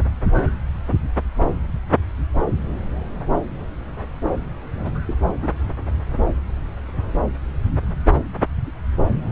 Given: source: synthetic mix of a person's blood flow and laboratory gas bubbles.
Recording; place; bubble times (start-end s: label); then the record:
Doppler ultrasound of blood flow; subclavian vein
4.74-5.00 s: bubbles
5.08-5.14 s: bubbles
5.28-5.48 s: bubbles
From the record:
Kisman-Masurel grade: 211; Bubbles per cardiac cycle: several, 3 to 8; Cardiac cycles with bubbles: 1 to 10%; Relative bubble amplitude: barely perceptible (0.100 to 0.250); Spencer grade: 1 (occasional bubble signal discernible with the cardiac motion signal, with majority of cardiac periods free of bubbles); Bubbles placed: anywhere in the cardiac cycle